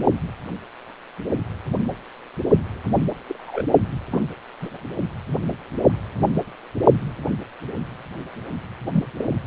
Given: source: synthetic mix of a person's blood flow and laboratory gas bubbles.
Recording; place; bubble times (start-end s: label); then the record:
Doppler ultrasound of blood flow; precordium
3.29-3.63 s: bubbles
4.11-4.21 s: bubbles
4.60-4.71 s: bubbles
8.93-9.05 s: bubbles
9.18-9.25 s: bubbles
From the record:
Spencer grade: 2 (many but less than half of the cardiac periods contain bubble signals, singularly or in groups); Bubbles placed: only in the low amplitude regions of the cardiac cycle